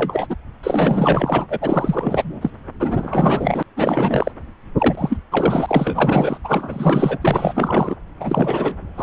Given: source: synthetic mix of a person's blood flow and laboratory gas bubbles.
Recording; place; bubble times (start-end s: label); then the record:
Doppler ultrasound of blood flow; subclavian vein
0.00-0.35 s: bubbles
0.63-1.47 s: bubbles
1.50-2.50 s: bubbles
2.79-3.63 s: bubbles
3.77-4.32 s: bubbles
4.78-5.17 s: bubbles
5.31-6.38 s: bubbles
6.44-7.18 s: bubbles
7.21-7.96 s: bubbles
8.20-8.76 s: bubbles
8.97-9.03 s: bubbles
From the record:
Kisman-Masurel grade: 444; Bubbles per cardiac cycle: continuous sound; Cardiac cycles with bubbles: 100%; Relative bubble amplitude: maximal (0.775 to 0.999); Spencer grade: 4 (maximum detectable bubble signal sounding continuously throughout systole and diastole of every cardiac period, and overriding the amplitude of the normal cardiac signals); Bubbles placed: anywhere in the cardiac cycle